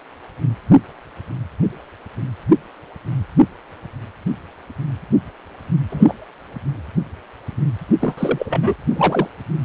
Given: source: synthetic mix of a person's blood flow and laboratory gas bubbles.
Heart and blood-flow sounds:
Doppler ultrasound of blood flow; precordium
5.90-6.15 s: bubbles
8.01-8.74 s: bubbles
8.90-9.28 s: bubbles
From the record:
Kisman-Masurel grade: 223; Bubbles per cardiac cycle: several, 3 to 8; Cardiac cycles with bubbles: 10 to 50%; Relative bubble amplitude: loud (0.450 to 0.775); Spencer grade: 2 (many but less than half of the cardiac periods contain bubble signals, singularly or in groups); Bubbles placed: anywhere in the cardiac cycle

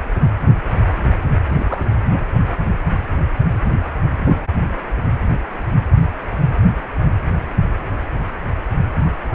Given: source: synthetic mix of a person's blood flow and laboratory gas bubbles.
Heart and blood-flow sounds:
Doppler ultrasound of blood flow; precordium
1.49-1.56 s: bubbles
1.58-1.83 s: bubbles
From the record:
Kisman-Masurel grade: 112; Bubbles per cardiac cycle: 1 to 2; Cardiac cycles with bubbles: 1 to 10%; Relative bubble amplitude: moderate (0.250 to 0.450); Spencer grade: 1 (occasional bubble signal discernible with the cardiac motion signal, with majority of cardiac periods free of bubbles); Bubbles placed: anywhere in the cardiac cycle

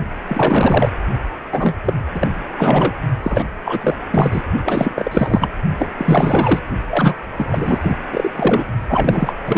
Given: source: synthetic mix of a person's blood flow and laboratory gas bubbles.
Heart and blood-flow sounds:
Doppler ultrasound of blood flow; precordium
0.26-0.89 s: bubbles
1.51-1.77 s: bubbles
1.85-1.94 s: bubbles
2.13-2.30 s: bubbles
2.57-2.92 s: bubbles
3.23-3.46 s: bubbles
3.64-3.95 s: bubbles
4.10-4.43 s: bubbles
4.66-5.49 s: bubbles
5.78-5.88 s: bubbles
5.98-6.60 s: bubbles
6.88-7.15 s: bubbles
7.36-7.78 s: bubbles
7.81-7.97 s: bubbles
8.12-8.31 s: bubbles
8.36-8.64 s: bubbles
8.89-9.33 s: bubbles
9.46-9.58 s: bubbles
From the record:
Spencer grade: 4 (maximum detectable bubble signal sounding continuously throughout systole and diastole of every cardiac period, and overriding the amplitude of the normal cardiac signals); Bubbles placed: only in the low amplitude regions of the cardiac cycle

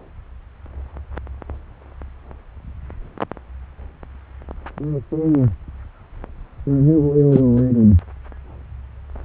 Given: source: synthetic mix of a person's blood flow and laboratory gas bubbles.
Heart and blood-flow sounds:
Doppler ultrasound of blood flow; subclavian vein
7.32-7.41 s: bubbles
7.57-7.62 s: bubbles
From the record:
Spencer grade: 1 (occasional bubble signal discernible with the cardiac motion signal, with majority of cardiac periods free of bubbles); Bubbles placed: anywhere in the cardiac cycle

